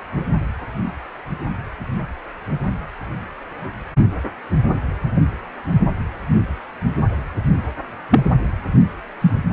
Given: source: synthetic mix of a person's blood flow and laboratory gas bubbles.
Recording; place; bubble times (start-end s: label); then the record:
Doppler ultrasound of blood flow; precordium
8.11-8.21 s: bubbles
9.21-9.31 s: bubbles
From the record:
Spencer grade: 2 (many but less than half of the cardiac periods contain bubble signals, singularly or in groups); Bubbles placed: anywhere in the cardiac cycle